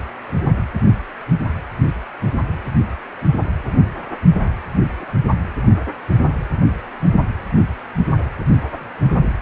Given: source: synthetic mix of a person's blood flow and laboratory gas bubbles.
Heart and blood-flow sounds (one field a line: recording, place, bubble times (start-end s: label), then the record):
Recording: Doppler ultrasound of blood flow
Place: precordium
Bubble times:
5.00-5.04 s: bubbles
From the record:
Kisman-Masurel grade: 111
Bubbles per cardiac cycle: 1 to 2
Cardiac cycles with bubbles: 1 to 10%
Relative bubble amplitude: barely perceptible (0.100 to 0.250)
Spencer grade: 1 (occasional bubble signal discernible with the cardiac motion signal, with majority of cardiac periods free of bubbles)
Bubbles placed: only in the low amplitude regions of the cardiac cycle